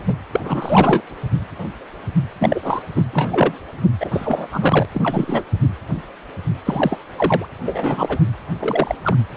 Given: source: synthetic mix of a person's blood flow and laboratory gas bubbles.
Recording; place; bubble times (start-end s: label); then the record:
Doppler ultrasound of blood flow; precordium
0.05-0.17 s: bubbles
0.33-1.02 s: bubbles
2.40-2.82 s: bubbles
2.96-3.02 s: bubbles
3.12-3.58 s: bubbles
4.00-4.47 s: bubbles
4.52-4.85 s: bubbles
4.94-5.43 s: bubbles
6.65-6.97 s: bubbles
7.17-7.46 s: bubbles
7.66-8.22 s: bubbles
8.59-8.95 s: bubbles
9.04-9.16 s: bubbles
From the record:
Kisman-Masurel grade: 233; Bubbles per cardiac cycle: several, 3 to 8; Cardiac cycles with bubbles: 50 to 99%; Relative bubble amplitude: loud (0.450 to 0.775); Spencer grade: 3 (all of the cardiac periods contain showers or single bubble signals, but not dominating or overriding the cardiac motion signals); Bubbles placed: anywhere in the cardiac cycle